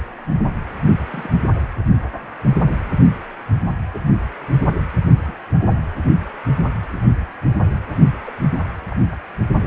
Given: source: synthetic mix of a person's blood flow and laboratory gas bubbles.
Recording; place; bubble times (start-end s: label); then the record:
Doppler ultrasound of blood flow; precordium
1.11-1.39 s: bubbles
3.94-3.98 s: bubbles
5.25-5.34 s: bubbles
5.66-5.75 s: bubbles
6.90-7.11 s: bubbles
8.26-8.33 s: bubbles
8.91-8.96 s: bubbles
9.11-9.14 s: bubbles
From the record:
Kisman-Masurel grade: 121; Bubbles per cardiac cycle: 1 to 2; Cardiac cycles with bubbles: 10 to 50%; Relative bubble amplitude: barely perceptible (0.100 to 0.250); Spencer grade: 2 (many but less than half of the cardiac periods contain bubble signals, singularly or in groups); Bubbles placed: anywhere in the cardiac cycle